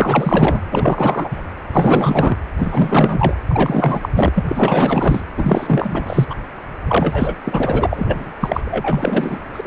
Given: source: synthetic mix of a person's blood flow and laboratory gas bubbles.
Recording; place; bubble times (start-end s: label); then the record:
Doppler ultrasound of blood flow; precordium
0.00-0.60 s: bubbles
0.71-1.42 s: bubbles
1.72-2.38 s: bubbles
2.58-3.35 s: bubbles
3.48-4.09 s: bubbles
4.15-4.43 s: bubbles
4.48-5.21 s: bubbles
5.37-6.27 s: bubbles
6.30-6.35 s: bubbles
6.88-7.36 s: bubbles
7.45-8.32 s: bubbles
8.40-8.61 s: bubbles
8.65-9.39 s: bubbles
9.53-9.67 s: bubbles
From the record:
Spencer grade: 4 (maximum detectable bubble signal sounding continuously throughout systole and diastole of every cardiac period, and overriding the amplitude of the normal cardiac signals); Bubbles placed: anywhere in the cardiac cycle